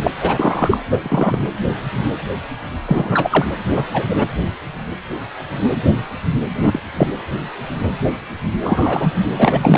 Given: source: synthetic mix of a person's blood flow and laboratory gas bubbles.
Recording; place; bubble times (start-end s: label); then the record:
Doppler ultrasound of blood flow; precordium
0.00-0.11 s: bubbles
0.17-0.77 s: bubbles
0.90-0.99 s: bubbles
1.05-1.39 s: bubbles
2.85-3.46 s: bubbles
3.75-3.85 s: bubbles
3.93-4.07 s: bubbles
4.09-4.26 s: bubbles
6.59-6.81 s: bubbles
6.97-7.07 s: bubbles
8.63-9.14 s: bubbles
9.38-9.78 s: bubbles
From the record:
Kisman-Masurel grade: 233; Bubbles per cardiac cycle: several, 3 to 8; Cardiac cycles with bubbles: 50 to 99%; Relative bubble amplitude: loud (0.450 to 0.775); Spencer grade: 3 (all of the cardiac periods contain showers or single bubble signals, but not dominating or overriding the cardiac motion signals); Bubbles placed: anywhere in the cardiac cycle